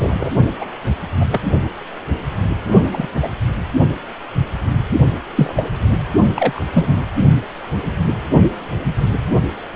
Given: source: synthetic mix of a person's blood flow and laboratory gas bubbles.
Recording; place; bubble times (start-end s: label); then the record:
Doppler ultrasound of blood flow; precordium
0.00-0.29 s: bubbles
0.61-0.66 s: bubbles
1.20-1.26 s: bubbles
1.31-1.43 s: bubbles
2.93-3.08 s: bubbles
3.21-3.29 s: bubbles
5.37-5.71 s: bubbles
6.36-6.61 s: bubbles
6.74-7.04 s: bubbles
From the record:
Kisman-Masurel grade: 233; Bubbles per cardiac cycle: several, 3 to 8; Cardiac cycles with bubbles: 50 to 99%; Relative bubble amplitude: loud (0.450 to 0.775); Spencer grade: 3 (all of the cardiac periods contain showers or single bubble signals, but not dominating or overriding the cardiac motion signals); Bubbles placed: only in the low amplitude regions of the cardiac cycle